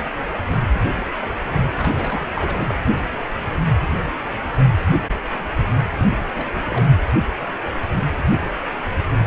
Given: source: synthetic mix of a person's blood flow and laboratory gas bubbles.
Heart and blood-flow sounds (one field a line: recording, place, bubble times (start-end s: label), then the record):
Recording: Doppler ultrasound of blood flow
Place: precordium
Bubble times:
1.78-2.31 s: bubbles
2.35-2.74 s: bubbles
5.97-6.18 s: bubbles
6.25-6.46 s: bubbles
6.54-6.62 s: bubbles
6.70-6.85 s: bubbles
From the record:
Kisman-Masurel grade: 221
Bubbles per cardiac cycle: several, 3 to 8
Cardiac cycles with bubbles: 10 to 50%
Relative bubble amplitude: barely perceptible (0.100 to 0.250)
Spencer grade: 2 (many but less than half of the cardiac periods contain bubble signals, singularly or in groups)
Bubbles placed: anywhere in the cardiac cycle